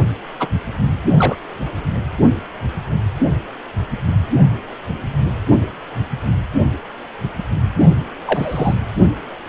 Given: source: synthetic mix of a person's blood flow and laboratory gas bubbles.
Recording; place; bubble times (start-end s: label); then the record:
Doppler ultrasound of blood flow; precordium
0.40-0.48 s: bubbles
1.17-1.38 s: bubbles
8.26-8.74 s: bubbles
From the record:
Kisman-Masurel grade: 122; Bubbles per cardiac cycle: 1 to 2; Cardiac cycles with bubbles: 10 to 50%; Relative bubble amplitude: moderate (0.250 to 0.450); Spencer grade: 2 (many but less than half of the cardiac periods contain bubble signals, singularly or in groups); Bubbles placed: only in the low amplitude regions of the cardiac cycle